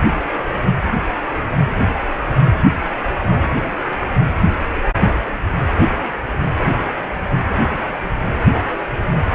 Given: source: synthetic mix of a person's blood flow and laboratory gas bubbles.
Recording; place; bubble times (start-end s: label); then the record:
Doppler ultrasound of blood flow; precordium
no bubbles
From the record:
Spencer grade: 0 (complete lack of bubble signals)